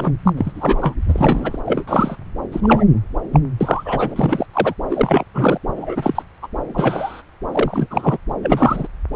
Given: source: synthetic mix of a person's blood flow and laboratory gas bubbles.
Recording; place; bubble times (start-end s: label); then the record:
Doppler ultrasound of blood flow; subclavian vein
0.00-0.12 s: bubbles
0.25-0.33 s: bubbles
0.37-0.52 s: bubbles
0.54-0.77 s: bubbles
0.81-0.95 s: bubbles
1.08-1.59 s: bubbles
1.66-1.83 s: bubbles
1.87-2.17 s: bubbles
2.52-2.84 s: bubbles
3.32-3.40 s: bubbles
3.60-4.46 s: bubbles
4.53-4.74 s: bubbles
4.89-5.23 s: bubbles
5.34-5.58 s: bubbles
5.75-6.22 s: bubbles
6.42-6.47 s: bubbles
6.74-7.22 s: bubbles
7.51-7.87 s: bubbles
7.90-8.18 s: bubbles
8.43-8.88 s: bubbles
From the record:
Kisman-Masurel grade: 243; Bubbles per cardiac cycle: several, 3 to 8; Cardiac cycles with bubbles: 100%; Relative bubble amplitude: loud (0.450 to 0.775); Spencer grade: 3 (all of the cardiac periods contain showers or single bubble signals, but not dominating or overriding the cardiac motion signals); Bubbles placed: anywhere in the cardiac cycle